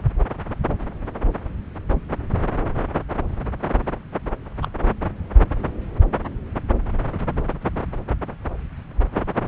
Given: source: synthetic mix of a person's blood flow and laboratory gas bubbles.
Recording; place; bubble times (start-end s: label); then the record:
Doppler ultrasound of blood flow; subclavian vein
4.62-4.67 s: bubbles
From the record:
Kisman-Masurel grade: 112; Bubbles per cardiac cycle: 1 to 2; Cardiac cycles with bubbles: 1 to 10%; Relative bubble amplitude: moderate (0.250 to 0.450); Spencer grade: 1 (occasional bubble signal discernible with the cardiac motion signal, with majority of cardiac periods free of bubbles); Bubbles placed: anywhere in the cardiac cycle